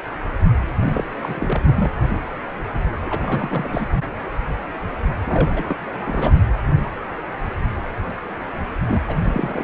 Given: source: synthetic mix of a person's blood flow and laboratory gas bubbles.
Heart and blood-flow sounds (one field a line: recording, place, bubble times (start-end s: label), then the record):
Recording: Doppler ultrasound of blood flow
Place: precordium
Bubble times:
0.83-1.04 s: bubbles
1.22-1.63 s: bubbles
1.67-1.91 s: bubbles
3.05-3.87 s: bubbles
5.25-5.76 s: bubbles
5.90-6.31 s: bubbles
8.88-9.02 s: bubbles
9.08-9.64 s: bubbles
From the record:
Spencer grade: 3 (all of the cardiac periods contain showers or single bubble signals, but not dominating or overriding the cardiac motion signals)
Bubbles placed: anywhere in the cardiac cycle